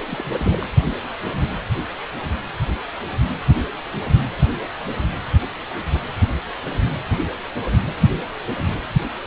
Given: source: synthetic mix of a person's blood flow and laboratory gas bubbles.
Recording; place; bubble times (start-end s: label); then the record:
Doppler ultrasound of blood flow; precordium
0.08-0.66 s: bubbles
From the record:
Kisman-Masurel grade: 211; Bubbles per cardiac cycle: several, 3 to 8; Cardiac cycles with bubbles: 1 to 10%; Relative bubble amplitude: barely perceptible (0.100 to 0.250); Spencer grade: 1 (occasional bubble signal discernible with the cardiac motion signal, with majority of cardiac periods free of bubbles); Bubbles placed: anywhere in the cardiac cycle